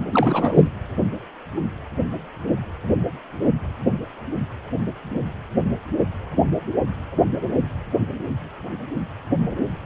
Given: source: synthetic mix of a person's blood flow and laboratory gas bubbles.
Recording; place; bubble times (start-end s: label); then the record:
Doppler ultrasound of blood flow; precordium
0.12-0.70 s: bubbles
From the record:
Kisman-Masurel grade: 213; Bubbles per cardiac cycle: several, 3 to 8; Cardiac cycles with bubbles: 1 to 10%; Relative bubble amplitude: loud (0.450 to 0.775); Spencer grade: 1 (occasional bubble signal discernible with the cardiac motion signal, with majority of cardiac periods free of bubbles); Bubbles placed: anywhere in the cardiac cycle